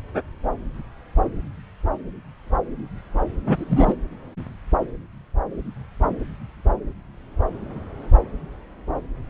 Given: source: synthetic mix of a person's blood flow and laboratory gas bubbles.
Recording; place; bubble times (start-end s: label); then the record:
Doppler ultrasound of blood flow; subclavian vein
3.46-3.96 s: bubbles
From the record:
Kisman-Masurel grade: 213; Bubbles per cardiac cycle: several, 3 to 8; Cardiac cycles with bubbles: 1 to 10%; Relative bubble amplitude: loud (0.450 to 0.775); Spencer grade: 1 (occasional bubble signal discernible with the cardiac motion signal, with majority of cardiac periods free of bubbles); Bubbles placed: anywhere in the cardiac cycle